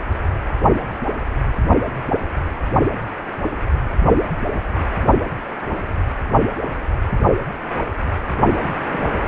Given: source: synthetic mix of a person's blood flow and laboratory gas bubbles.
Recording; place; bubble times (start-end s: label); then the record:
Doppler ultrasound of blood flow; precordium
8.55-9.07 s: bubbles
9.13-9.28 s: bubbles
From the record:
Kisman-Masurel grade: 211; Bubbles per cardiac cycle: several, 3 to 8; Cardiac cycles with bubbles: 1 to 10%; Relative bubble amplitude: barely perceptible (0.100 to 0.250); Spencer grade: 1 (occasional bubble signal discernible with the cardiac motion signal, with majority of cardiac periods free of bubbles); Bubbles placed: only in the low amplitude regions of the cardiac cycle